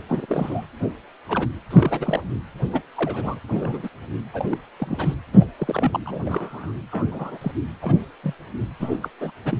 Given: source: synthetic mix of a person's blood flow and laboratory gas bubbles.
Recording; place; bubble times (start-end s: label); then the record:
Doppler ultrasound of blood flow; precordium
0.08-0.26 s: bubbles
0.28-0.66 s: bubbles
0.82-0.88 s: bubbles
1.28-1.48 s: bubbles
1.70-2.24 s: bubbles
2.73-2.83 s: bubbles
2.95-3.40 s: bubbles
3.49-3.89 s: bubbles
4.33-4.46 s: bubbles
4.50-4.57 s: bubbles
4.76-5.17 s: bubbles
5.34-5.45 s: bubbles
5.58-6.00 s: bubbles
6.05-6.72 s: bubbles
6.91-7.07 s: bubbles
7.11-7.38 s: bubbles
7.41-7.52 s: bubbles
7.82-7.94 s: bubbles
8.23-8.33 s: bubbles
8.80-8.97 s: bubbles
9.02-9.08 s: bubbles
9.21-9.31 s: bubbles
9.45-9.57 s: bubbles
From the record:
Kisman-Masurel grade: 232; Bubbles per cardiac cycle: several, 3 to 8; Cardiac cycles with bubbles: 50 to 99%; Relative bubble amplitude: moderate (0.250 to 0.450); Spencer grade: 3 (all of the cardiac periods contain showers or single bubble signals, but not dominating or overriding the cardiac motion signals); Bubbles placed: anywhere in the cardiac cycle